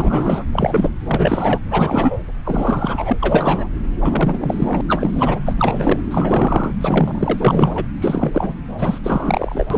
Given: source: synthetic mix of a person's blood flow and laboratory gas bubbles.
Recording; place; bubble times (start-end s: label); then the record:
Doppler ultrasound of blood flow; subclavian vein
0.00-0.44 s: bubbles
0.53-0.92 s: bubbles
1.05-1.61 s: bubbles
1.70-2.17 s: bubbles
2.44-3.17 s: bubbles
3.21-3.69 s: bubbles
4.01-4.81 s: bubbles
4.88-5.39 s: bubbles
5.46-6.00 s: bubbles
6.10-6.74 s: bubbles
6.80-7.85 s: bubbles
8.00-8.55 s: bubbles
8.79-8.99 s: bubbles
9.03-9.67 s: bubbles
9.70-9.78 s: bubbles
From the record:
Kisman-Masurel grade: 343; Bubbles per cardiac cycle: rolling drumbeat, 9 or more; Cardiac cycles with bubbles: 100%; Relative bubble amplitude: loud (0.450 to 0.775); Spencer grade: 3 (all of the cardiac periods contain showers or single bubble signals, but not dominating or overriding the cardiac motion signals); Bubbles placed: anywhere in the cardiac cycle